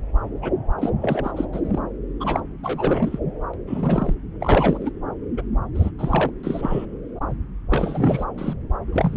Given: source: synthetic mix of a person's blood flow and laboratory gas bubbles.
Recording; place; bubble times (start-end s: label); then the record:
Doppler ultrasound of blood flow; subclavian vein
0.42-0.51 s: bubbles
0.79-0.90 s: bubbles
1.02-1.31 s: bubbles
1.36-1.46 s: bubbles
1.53-1.60 s: bubbles
1.65-1.79 s: bubbles
2.20-2.43 s: bubbles
2.63-3.19 s: bubbles
3.54-3.58 s: bubbles
3.67-4.15 s: bubbles
4.41-4.92 s: bubbles
5.37-5.42 s: bubbles
5.75-5.91 s: bubbles
5.98-6.30 s: bubbles
6.43-6.86 s: bubbles
7.69-8.24 s: bubbles
8.38-8.53 s: bubbles
8.92-9.17 s: bubbles
From the record:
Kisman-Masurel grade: 342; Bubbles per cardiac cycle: rolling drumbeat, 9 or more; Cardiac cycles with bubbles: 100%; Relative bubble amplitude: moderate (0.250 to 0.450); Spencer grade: 3 (all of the cardiac periods contain showers or single bubble signals, but not dominating or overriding the cardiac motion signals); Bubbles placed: anywhere in the cardiac cycle